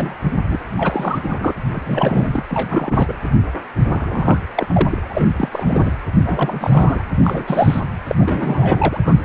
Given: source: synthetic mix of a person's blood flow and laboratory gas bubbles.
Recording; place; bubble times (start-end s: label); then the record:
Doppler ultrasound of blood flow; precordium
0.00-0.15 s: bubbles
0.48-0.57 s: bubbles
0.77-1.54 s: bubbles
1.72-2.42 s: bubbles
2.49-3.15 s: bubbles
3.92-4.38 s: bubbles
4.54-4.87 s: bubbles
4.90-5.25 s: bubbles
5.39-5.49 s: bubbles
5.51-5.93 s: bubbles
6.25-7.04 s: bubbles
7.18-7.82 s: bubbles
8.07-8.15 s: bubbles
8.18-9.01 s: bubbles
9.05-9.25 s: bubbles
From the record:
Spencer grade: 3 (all of the cardiac periods contain showers or single bubble signals, but not dominating or overriding the cardiac motion signals); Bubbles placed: anywhere in the cardiac cycle